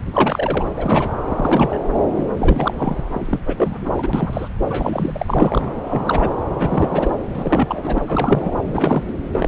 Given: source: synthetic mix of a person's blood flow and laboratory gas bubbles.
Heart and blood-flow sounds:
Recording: Doppler ultrasound of blood flow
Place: subclavian vein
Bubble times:
0.14-0.65 s: bubbles
0.76-1.16 s: bubbles
1.28-1.80 s: bubbles
2.16-2.25 s: bubbles
2.37-3.03 s: bubbles
3.13-3.40 s: bubbles
3.46-3.92 s: bubbles
3.94-4.09 s: bubbles
4.13-4.49 s: bubbles
4.63-5.75 s: bubbles
5.84-6.29 s: bubbles
6.58-7.11 s: bubbles
7.33-7.99 s: bubbles
8.07-8.50 s: bubbles
8.65-9.02 s: bubbles
9.07-9.13 s: bubbles
9.32-9.48 s: bubbles
From the record:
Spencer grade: 3 (all of the cardiac periods contain showers or single bubble signals, but not dominating or overriding the cardiac motion signals)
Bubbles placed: anywhere in the cardiac cycle

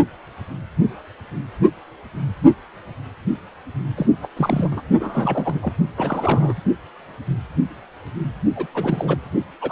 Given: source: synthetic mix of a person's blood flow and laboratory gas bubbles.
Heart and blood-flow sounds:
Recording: Doppler ultrasound of blood flow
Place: precordium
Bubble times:
3.96-4.06 s: bubbles
4.22-4.28 s: bubbles
4.36-4.81 s: bubbles
5.00-5.72 s: bubbles
5.97-6.54 s: bubbles
8.56-8.67 s: bubbles
8.74-9.17 s: bubbles
9.61-9.72 s: bubbles
From the record:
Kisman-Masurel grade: 332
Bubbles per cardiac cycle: rolling drumbeat, 9 or more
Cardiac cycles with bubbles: 50 to 99%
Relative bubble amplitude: moderate (0.250 to 0.450)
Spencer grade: 3 (all of the cardiac periods contain showers or single bubble signals, but not dominating or overriding the cardiac motion signals)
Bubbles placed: only in the low amplitude regions of the cardiac cycle

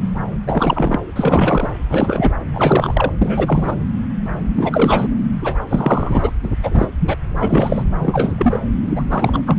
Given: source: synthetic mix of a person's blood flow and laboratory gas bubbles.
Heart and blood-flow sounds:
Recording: Doppler ultrasound of blood flow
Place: subclavian vein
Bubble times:
0.46-0.99 s: bubbles
1.15-1.70 s: bubbles
1.89-2.35 s: bubbles
2.54-3.13 s: bubbles
3.22-3.76 s: bubbles
4.55-5.15 s: bubbles
5.42-5.56 s: bubbles
5.67-6.31 s: bubbles
6.43-6.49 s: bubbles
6.63-6.87 s: bubbles
7.00-7.16 s: bubbles
7.41-7.83 s: bubbles
8.00-8.60 s: bubbles
8.82-9.03 s: bubbles
9.10-9.42 s: bubbles
9.46-9.57 s: bubbles
From the record:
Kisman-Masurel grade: 333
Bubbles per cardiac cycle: rolling drumbeat, 9 or more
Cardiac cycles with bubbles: 50 to 99%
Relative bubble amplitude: loud (0.450 to 0.775)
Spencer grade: 3 (all of the cardiac periods contain showers or single bubble signals, but not dominating or overriding the cardiac motion signals)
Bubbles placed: anywhere in the cardiac cycle

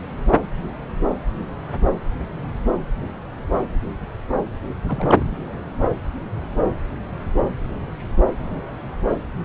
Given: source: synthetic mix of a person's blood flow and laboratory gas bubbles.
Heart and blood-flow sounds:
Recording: Doppler ultrasound of blood flow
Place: subclavian vein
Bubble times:
4.84-5.25 s: bubbles
5.29-5.37 s: bubbles
From the record:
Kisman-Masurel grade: 211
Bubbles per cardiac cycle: several, 3 to 8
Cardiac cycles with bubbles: 1 to 10%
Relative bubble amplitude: barely perceptible (0.100 to 0.250)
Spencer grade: 1 (occasional bubble signal discernible with the cardiac motion signal, with majority of cardiac periods free of bubbles)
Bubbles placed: anywhere in the cardiac cycle

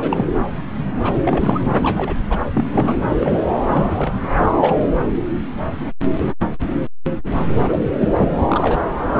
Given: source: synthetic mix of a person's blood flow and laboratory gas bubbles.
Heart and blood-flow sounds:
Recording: Doppler ultrasound of blood flow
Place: subclavian vein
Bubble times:
0.00-0.28 s: bubbles
1.03-1.15 s: bubbles
1.23-1.61 s: bubbles
1.80-2.19 s: bubbles
2.29-2.39 s: bubbles
2.54-3.04 s: bubbles
3.08-3.40 s: bubbles
3.68-4.14 s: bubbles
4.21-4.26 s: bubbles
4.37-4.46 s: bubbles
4.60-4.74 s: bubbles
7.57-7.87 s: bubbles
7.98-8.38 s: bubbles
8.50-8.86 s: bubbles
9.13-9.20 s: bubbles
From the record:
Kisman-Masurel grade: 232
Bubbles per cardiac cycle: several, 3 to 8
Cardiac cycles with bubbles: 50 to 99%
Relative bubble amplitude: moderate (0.250 to 0.450)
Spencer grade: 3 (all of the cardiac periods contain showers or single bubble signals, but not dominating or overriding the cardiac motion signals)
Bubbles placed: anywhere in the cardiac cycle

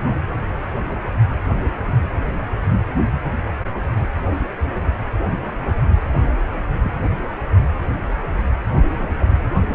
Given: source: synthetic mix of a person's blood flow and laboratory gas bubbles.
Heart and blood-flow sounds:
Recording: Doppler ultrasound of blood flow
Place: precordium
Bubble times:
6.72-6.79 s: bubbles
6.83-6.96 s: bubbles
8.95-9.48 s: bubbles
From the record:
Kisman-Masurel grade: 111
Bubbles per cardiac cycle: 1 to 2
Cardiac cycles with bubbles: 1 to 10%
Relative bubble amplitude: barely perceptible (0.100 to 0.250)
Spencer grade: 1 (occasional bubble signal discernible with the cardiac motion signal, with majority of cardiac periods free of bubbles)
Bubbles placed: anywhere in the cardiac cycle

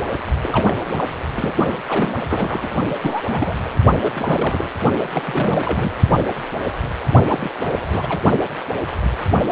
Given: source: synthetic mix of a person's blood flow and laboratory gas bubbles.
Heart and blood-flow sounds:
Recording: Doppler ultrasound of blood flow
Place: precordium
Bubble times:
0.00-0.05 s: bubbles
0.43-0.76 s: bubbles
0.85-1.07 s: bubbles
1.36-1.53 s: bubbles
1.86-2.15 s: bubbles
2.27-2.68 s: bubbles
3.01-3.21 s: bubbles
3.25-3.54 s: bubbles
3.65-3.70 s: bubbles
4.01-4.70 s: bubbles
5.14-5.23 s: bubbles
5.25-5.91 s: bubbles
7.30-7.50 s: bubbles
7.59-8.22 s: bubbles
From the record:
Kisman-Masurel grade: 332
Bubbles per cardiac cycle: rolling drumbeat, 9 or more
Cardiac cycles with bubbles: 50 to 99%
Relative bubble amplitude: moderate (0.250 to 0.450)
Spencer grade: 3 (all of the cardiac periods contain showers or single bubble signals, but not dominating or overriding the cardiac motion signals)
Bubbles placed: only in the low amplitude regions of the cardiac cycle

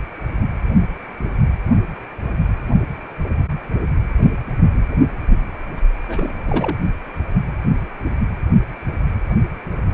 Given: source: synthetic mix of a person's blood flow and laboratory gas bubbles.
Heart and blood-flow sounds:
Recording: Doppler ultrasound of blood flow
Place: precordium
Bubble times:
6.08-6.77 s: bubbles
From the record:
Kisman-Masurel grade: 211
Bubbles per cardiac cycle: several, 3 to 8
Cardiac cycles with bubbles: 1 to 10%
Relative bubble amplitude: barely perceptible (0.100 to 0.250)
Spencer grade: 1 (occasional bubble signal discernible with the cardiac motion signal, with majority of cardiac periods free of bubbles)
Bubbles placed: only in the low amplitude regions of the cardiac cycle

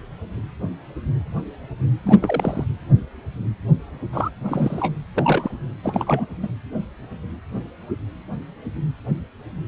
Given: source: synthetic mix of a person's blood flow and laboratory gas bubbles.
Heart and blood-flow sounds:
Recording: Doppler ultrasound of blood flow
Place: precordium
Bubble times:
2.03-2.18 s: bubbles
2.21-2.65 s: bubbles
4.12-4.30 s: bubbles
4.44-4.93 s: bubbles
5.17-5.57 s: bubbles
5.83-6.26 s: bubbles
6.42-6.49 s: bubbles
From the record:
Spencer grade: 2 (many but less than half of the cardiac periods contain bubble signals, singularly or in groups)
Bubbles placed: anywhere in the cardiac cycle

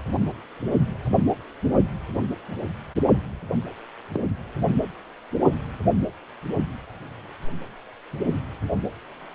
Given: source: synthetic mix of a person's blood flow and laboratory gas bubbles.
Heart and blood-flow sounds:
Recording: Doppler ultrasound of blood flow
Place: precordium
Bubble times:
4.12-4.20 s: bubbles
From the record:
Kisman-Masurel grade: 112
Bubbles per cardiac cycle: 1 to 2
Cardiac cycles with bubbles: 1 to 10%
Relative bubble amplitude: moderate (0.250 to 0.450)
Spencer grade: 1 (occasional bubble signal discernible with the cardiac motion signal, with majority of cardiac periods free of bubbles)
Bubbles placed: anywhere in the cardiac cycle

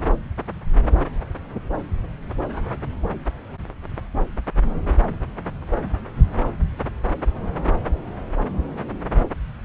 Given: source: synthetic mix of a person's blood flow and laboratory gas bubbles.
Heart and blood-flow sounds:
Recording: Doppler ultrasound of blood flow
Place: subclavian vein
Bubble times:
no bubbles
From the record:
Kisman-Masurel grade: 000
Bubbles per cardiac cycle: 0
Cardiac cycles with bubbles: 0%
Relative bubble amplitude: no bubbles discernible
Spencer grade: 0 (complete lack of bubble signals)

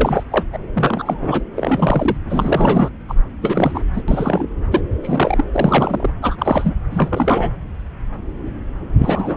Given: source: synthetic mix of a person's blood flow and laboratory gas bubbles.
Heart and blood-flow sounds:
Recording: Doppler ultrasound of blood flow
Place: subclavian vein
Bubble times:
0.00-0.24 s: bubbles
0.31-0.45 s: bubbles
0.53-0.57 s: bubbles
0.74-1.42 s: bubbles
1.56-2.17 s: bubbles
2.29-2.90 s: bubbles
3.08-3.15 s: bubbles
3.42-3.82 s: bubbles
3.93-4.03 s: bubbles
4.08-4.46 s: bubbles
4.71-4.81 s: bubbles
5.03-5.45 s: bubbles
5.54-6.10 s: bubbles
6.22-6.36 s: bubbles
6.38-6.74 s: bubbles
6.91-7.51 s: bubbles
8.98-9.37 s: bubbles
From the record:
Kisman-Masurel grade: 332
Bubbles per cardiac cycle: rolling drumbeat, 9 or more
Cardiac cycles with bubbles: 50 to 99%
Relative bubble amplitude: moderate (0.250 to 0.450)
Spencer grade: 3 (all of the cardiac periods contain showers or single bubble signals, but not dominating or overriding the cardiac motion signals)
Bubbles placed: anywhere in the cardiac cycle

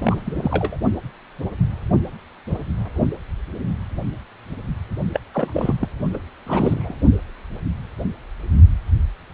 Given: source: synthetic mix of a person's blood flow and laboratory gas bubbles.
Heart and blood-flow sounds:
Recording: Doppler ultrasound of blood flow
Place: precordium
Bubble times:
0.00-0.76 s: bubbles
5.13-5.21 s: bubbles
5.34-5.74 s: bubbles
5.80-5.88 s: bubbles
6.13-6.18 s: bubbles
6.46-6.95 s: bubbles
From the record:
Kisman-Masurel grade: 222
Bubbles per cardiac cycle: several, 3 to 8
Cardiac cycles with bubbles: 10 to 50%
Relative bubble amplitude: moderate (0.250 to 0.450)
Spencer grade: 2 (many but less than half of the cardiac periods contain bubble signals, singularly or in groups)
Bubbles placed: only in the low amplitude regions of the cardiac cycle

